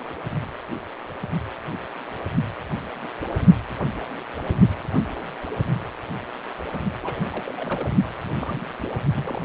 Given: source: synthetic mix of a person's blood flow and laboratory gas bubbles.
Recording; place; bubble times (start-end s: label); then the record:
Doppler ultrasound of blood flow; precordium
7.02-7.52 s: bubbles
7.56-7.89 s: bubbles
8.24-8.29 s: bubbles
8.35-8.64 s: bubbles
8.79-8.90 s: bubbles
9.15-9.39 s: bubbles
From the record:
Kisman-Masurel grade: 221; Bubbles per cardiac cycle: several, 3 to 8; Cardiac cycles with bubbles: 10 to 50%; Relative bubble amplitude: barely perceptible (0.100 to 0.250); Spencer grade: 2 (many but less than half of the cardiac periods contain bubble signals, singularly or in groups); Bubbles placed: only in the low amplitude regions of the cardiac cycle